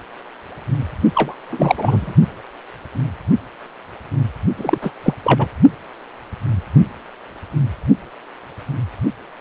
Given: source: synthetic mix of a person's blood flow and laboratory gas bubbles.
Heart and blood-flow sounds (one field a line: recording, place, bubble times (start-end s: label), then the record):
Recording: Doppler ultrasound of blood flow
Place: precordium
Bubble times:
1.15-1.34 s: bubbles
1.50-2.14 s: bubbles
4.57-4.79 s: bubbles
4.82-4.92 s: bubbles
5.03-5.14 s: bubbles
5.24-5.47 s: bubbles
From the record:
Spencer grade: 2 (many but less than half of the cardiac periods contain bubble signals, singularly or in groups)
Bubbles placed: only in the low amplitude regions of the cardiac cycle